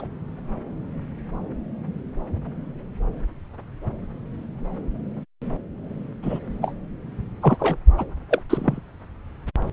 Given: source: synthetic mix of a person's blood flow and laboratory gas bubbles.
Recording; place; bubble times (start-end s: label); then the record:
Doppler ultrasound of blood flow; subclavian vein
0.00-0.07 s: bubbles
6.22-6.38 s: bubbles
6.61-6.72 s: bubbles
7.42-7.56 s: bubbles
7.59-7.76 s: bubbles
7.98-8.04 s: bubbles
8.31-8.42 s: bubbles
8.50-8.80 s: bubbles
From the record:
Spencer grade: 2 (many but less than half of the cardiac periods contain bubble signals, singularly or in groups); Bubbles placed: anywhere in the cardiac cycle